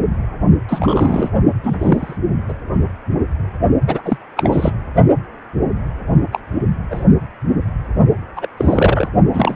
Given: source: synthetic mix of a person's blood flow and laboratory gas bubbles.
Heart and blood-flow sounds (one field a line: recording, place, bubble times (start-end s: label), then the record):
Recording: Doppler ultrasound of blood flow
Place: precordium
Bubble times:
0.68-1.30 s: bubbles
1.63-2.17 s: bubbles
2.48-2.53 s: bubbles
3.87-4.01 s: bubbles
4.05-4.18 s: bubbles
4.36-4.73 s: bubbles
6.32-6.40 s: bubbles
6.90-7.04 s: bubbles
8.36-8.47 s: bubbles
8.57-9.09 s: bubbles
9.32-9.56 s: bubbles
From the record:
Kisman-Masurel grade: 223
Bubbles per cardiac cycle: several, 3 to 8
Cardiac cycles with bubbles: 10 to 50%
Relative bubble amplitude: loud (0.450 to 0.775)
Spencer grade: 2 (many but less than half of the cardiac periods contain bubble signals, singularly or in groups)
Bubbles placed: only in the low amplitude regions of the cardiac cycle